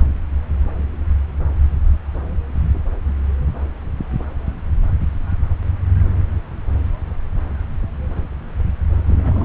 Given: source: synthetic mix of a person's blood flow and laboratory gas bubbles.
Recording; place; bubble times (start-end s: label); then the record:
Doppler ultrasound of blood flow; subclavian vein
9.06-9.45 s: bubbles
From the record:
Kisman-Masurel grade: 111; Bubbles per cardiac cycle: 1 to 2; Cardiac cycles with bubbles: 1 to 10%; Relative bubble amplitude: barely perceptible (0.100 to 0.250); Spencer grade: 1 (occasional bubble signal discernible with the cardiac motion signal, with majority of cardiac periods free of bubbles); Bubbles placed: anywhere in the cardiac cycle